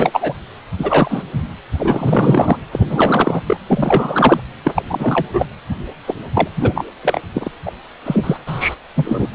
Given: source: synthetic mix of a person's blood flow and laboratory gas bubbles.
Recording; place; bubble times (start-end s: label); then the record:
Doppler ultrasound of blood flow; precordium
0.00-0.33 s: bubbles
0.79-1.23 s: bubbles
1.33-1.44 s: bubbles
1.79-2.58 s: bubbles
2.71-3.41 s: bubbles
3.46-3.56 s: bubbles
3.69-4.40 s: bubbles
4.64-4.71 s: bubbles
4.74-4.82 s: bubbles
4.89-5.28 s: bubbles
5.33-5.46 s: bubbles
6.06-6.14 s: bubbles
6.33-6.48 s: bubbles
6.56-6.85 s: bubbles
7.02-7.21 s: bubbles
7.33-7.51 s: bubbles
7.65-7.71 s: bubbles
8.04-8.38 s: bubbles
8.46-8.75 s: bubbles
8.96-9.29 s: bubbles
9.31-9.35 s: bubbles
From the record:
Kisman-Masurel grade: 343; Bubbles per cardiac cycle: rolling drumbeat, 9 or more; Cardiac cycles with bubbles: 100%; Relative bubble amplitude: loud (0.450 to 0.775); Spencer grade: 3 (all of the cardiac periods contain showers or single bubble signals, but not dominating or overriding the cardiac motion signals); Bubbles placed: anywhere in the cardiac cycle